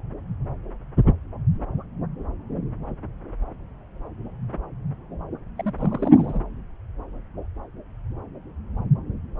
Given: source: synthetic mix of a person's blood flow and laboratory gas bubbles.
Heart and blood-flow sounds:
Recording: Doppler ultrasound of blood flow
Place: subclavian vein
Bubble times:
5.58-5.72 s: bubbles
5.78-6.40 s: bubbles
From the record:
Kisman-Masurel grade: 211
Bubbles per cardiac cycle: several, 3 to 8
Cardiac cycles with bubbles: 1 to 10%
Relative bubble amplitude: barely perceptible (0.100 to 0.250)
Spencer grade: 1 (occasional bubble signal discernible with the cardiac motion signal, with majority of cardiac periods free of bubbles)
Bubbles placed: anywhere in the cardiac cycle

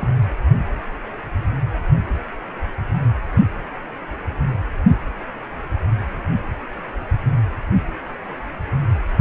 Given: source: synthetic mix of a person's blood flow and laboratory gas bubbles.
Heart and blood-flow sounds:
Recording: Doppler ultrasound of blood flow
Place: precordium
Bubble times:
0.00-0.11 s: bubbles
From the record:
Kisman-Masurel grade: 211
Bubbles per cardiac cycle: several, 3 to 8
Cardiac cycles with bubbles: 1 to 10%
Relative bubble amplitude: barely perceptible (0.100 to 0.250)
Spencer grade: 1 (occasional bubble signal discernible with the cardiac motion signal, with majority of cardiac periods free of bubbles)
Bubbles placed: anywhere in the cardiac cycle

